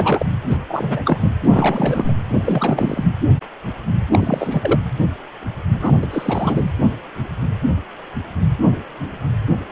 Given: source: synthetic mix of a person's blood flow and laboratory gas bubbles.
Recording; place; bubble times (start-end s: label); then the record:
Doppler ultrasound of blood flow; precordium
0.00-0.26 s: bubbles
0.49-0.57 s: bubbles
0.68-1.01 s: bubbles
1.04-1.30 s: bubbles
1.45-2.12 s: bubbles
2.23-3.04 s: bubbles
4.12-4.80 s: bubbles
5.79-5.92 s: bubbles
6.01-6.07 s: bubbles
6.11-6.72 s: bubbles
From the record:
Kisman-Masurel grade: 333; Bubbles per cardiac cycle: rolling drumbeat, 9 or more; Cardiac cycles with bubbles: 50 to 99%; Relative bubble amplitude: loud (0.450 to 0.775); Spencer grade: 3 (all of the cardiac periods contain showers or single bubble signals, but not dominating or overriding the cardiac motion signals); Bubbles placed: anywhere in the cardiac cycle